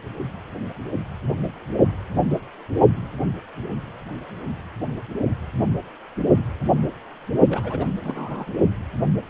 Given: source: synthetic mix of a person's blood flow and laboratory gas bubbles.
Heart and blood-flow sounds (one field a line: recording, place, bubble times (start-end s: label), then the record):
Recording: Doppler ultrasound of blood flow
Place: precordium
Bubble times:
7.48-7.88 s: bubbles
8.02-8.59 s: bubbles
From the record:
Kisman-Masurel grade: 221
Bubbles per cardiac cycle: several, 3 to 8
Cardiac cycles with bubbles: 10 to 50%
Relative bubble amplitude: barely perceptible (0.100 to 0.250)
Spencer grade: 2 (many but less than half of the cardiac periods contain bubble signals, singularly or in groups)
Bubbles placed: only in the low amplitude regions of the cardiac cycle